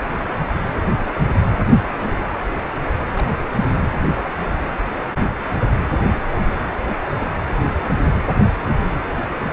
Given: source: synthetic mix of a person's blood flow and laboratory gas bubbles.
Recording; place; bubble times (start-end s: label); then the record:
Doppler ultrasound of blood flow; precordium
2.00-2.25 s: bubbles
3.16-3.39 s: bubbles
From the record:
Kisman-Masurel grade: 211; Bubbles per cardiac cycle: several, 3 to 8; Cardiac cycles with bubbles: 1 to 10%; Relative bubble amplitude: barely perceptible (0.100 to 0.250); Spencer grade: 1 (occasional bubble signal discernible with the cardiac motion signal, with majority of cardiac periods free of bubbles); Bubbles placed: anywhere in the cardiac cycle